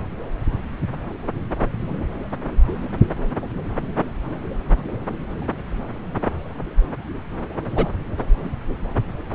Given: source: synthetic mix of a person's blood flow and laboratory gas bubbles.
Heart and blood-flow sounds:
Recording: Doppler ultrasound of blood flow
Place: subclavian vein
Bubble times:
7.76-7.88 s: bubbles
From the record:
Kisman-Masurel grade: 112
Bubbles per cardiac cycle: 1 to 2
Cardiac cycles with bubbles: 1 to 10%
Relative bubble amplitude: moderate (0.250 to 0.450)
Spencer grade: 1 (occasional bubble signal discernible with the cardiac motion signal, with majority of cardiac periods free of bubbles)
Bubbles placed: anywhere in the cardiac cycle

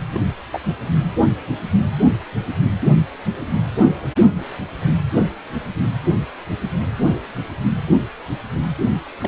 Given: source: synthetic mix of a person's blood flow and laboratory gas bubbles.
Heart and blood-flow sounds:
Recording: Doppler ultrasound of blood flow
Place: precordium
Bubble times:
0.11-0.20 s: bubbles
0.52-0.59 s: bubbles
9.21-9.28 s: bubbles
From the record:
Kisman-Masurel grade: 121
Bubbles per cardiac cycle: 1 to 2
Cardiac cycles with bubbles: 10 to 50%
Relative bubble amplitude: barely perceptible (0.100 to 0.250)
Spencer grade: 2 (many but less than half of the cardiac periods contain bubble signals, singularly or in groups)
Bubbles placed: anywhere in the cardiac cycle

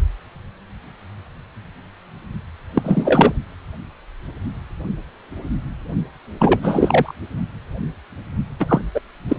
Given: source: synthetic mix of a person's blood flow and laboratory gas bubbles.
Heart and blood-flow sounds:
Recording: Doppler ultrasound of blood flow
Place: precordium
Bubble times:
2.75-3.33 s: bubbles
6.39-7.13 s: bubbles
8.60-8.82 s: bubbles
8.95-9.01 s: bubbles
9.28-9.37 s: bubbles
From the record:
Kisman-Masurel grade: 223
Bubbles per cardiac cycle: several, 3 to 8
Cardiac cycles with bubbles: 10 to 50%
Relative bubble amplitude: loud (0.450 to 0.775)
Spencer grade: 2 (many but less than half of the cardiac periods contain bubble signals, singularly or in groups)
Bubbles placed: only in the low amplitude regions of the cardiac cycle

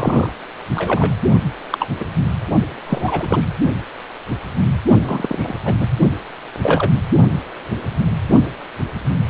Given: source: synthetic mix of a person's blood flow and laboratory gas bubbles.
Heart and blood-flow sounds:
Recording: Doppler ultrasound of blood flow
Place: precordium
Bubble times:
0.00-0.30 s: bubbles
0.75-1.15 s: bubbles
1.71-1.89 s: bubbles
1.99-2.04 s: bubbles
2.85-3.49 s: bubbles
5.04-5.54 s: bubbles
5.65-5.74 s: bubbles
5.79-5.88 s: bubbles
6.58-6.92 s: bubbles
From the record:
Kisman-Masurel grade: 232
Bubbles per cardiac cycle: several, 3 to 8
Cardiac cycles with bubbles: 50 to 99%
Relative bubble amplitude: moderate (0.250 to 0.450)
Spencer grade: 3 (all of the cardiac periods contain showers or single bubble signals, but not dominating or overriding the cardiac motion signals)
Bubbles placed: only in the low amplitude regions of the cardiac cycle

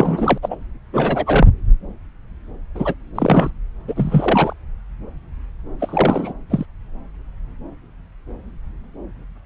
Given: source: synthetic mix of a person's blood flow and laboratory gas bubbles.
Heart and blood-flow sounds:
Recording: Doppler ultrasound of blood flow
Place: subclavian vein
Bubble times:
0.00-0.38 s: bubbles
0.42-0.55 s: bubbles
0.92-1.47 s: bubbles
2.75-2.95 s: bubbles
3.15-3.50 s: bubbles
3.88-4.53 s: bubbles
5.79-6.33 s: bubbles
6.50-6.66 s: bubbles
From the record:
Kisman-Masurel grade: 233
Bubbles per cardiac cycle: several, 3 to 8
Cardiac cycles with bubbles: 50 to 99%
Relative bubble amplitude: loud (0.450 to 0.775)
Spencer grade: 3 (all of the cardiac periods contain showers or single bubble signals, but not dominating or overriding the cardiac motion signals)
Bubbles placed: anywhere in the cardiac cycle

